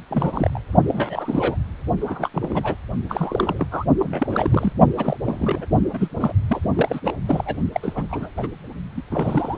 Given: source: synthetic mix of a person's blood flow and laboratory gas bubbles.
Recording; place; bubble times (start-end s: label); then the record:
Doppler ultrasound of blood flow; precordium
0.10-0.61 s: bubbles
0.88-1.56 s: bubbles
2.00-2.30 s: bubbles
2.34-2.75 s: bubbles
3.09-3.66 s: bubbles
3.71-3.84 s: bubbles
3.99-4.73 s: bubbles
4.97-5.17 s: bubbles
5.25-5.66 s: bubbles
5.93-6.08 s: bubbles
6.20-6.33 s: bubbles
6.48-6.60 s: bubbles
6.75-7.00 s: bubbles
7.04-7.14 s: bubbles
7.27-7.57 s: bubbles
7.72-7.80 s: bubbles
7.83-8.07 s: bubbles
8.09-8.29 s: bubbles
8.37-8.48 s: bubbles
8.96-9.01 s: bubbles
9.11-9.57 s: bubbles
From the record:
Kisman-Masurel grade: 342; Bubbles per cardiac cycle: rolling drumbeat, 9 or more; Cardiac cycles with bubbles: 100%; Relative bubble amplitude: moderate (0.250 to 0.450); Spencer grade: 3 (all of the cardiac periods contain showers or single bubble signals, but not dominating or overriding the cardiac motion signals); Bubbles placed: only in the low amplitude regions of the cardiac cycle